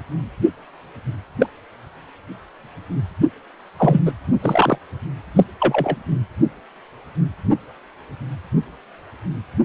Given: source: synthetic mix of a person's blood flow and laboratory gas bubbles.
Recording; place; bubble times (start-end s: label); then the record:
Doppler ultrasound of blood flow; precordium
1.39-1.46 s: bubbles
3.79-4.00 s: bubbles
4.06-4.12 s: bubbles
4.42-4.79 s: bubbles
5.36-5.44 s: bubbles
5.59-5.96 s: bubbles
From the record:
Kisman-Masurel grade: 123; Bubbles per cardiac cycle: 1 to 2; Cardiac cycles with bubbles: 10 to 50%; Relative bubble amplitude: loud (0.450 to 0.775); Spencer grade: 2 (many but less than half of the cardiac periods contain bubble signals, singularly or in groups); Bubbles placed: anywhere in the cardiac cycle